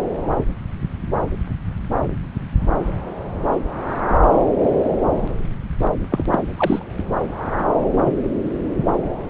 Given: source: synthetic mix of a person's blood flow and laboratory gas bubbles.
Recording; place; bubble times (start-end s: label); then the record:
Doppler ultrasound of blood flow; subclavian vein
4.09-4.14 s: bubbles
6.11-6.25 s: bubbles
6.30-6.39 s: bubbles
6.56-6.83 s: bubbles
8.06-8.12 s: bubbles
From the record:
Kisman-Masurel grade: 122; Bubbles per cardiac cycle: 1 to 2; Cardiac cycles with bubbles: 10 to 50%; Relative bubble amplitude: moderate (0.250 to 0.450); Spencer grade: 2 (many but less than half of the cardiac periods contain bubble signals, singularly or in groups); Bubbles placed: anywhere in the cardiac cycle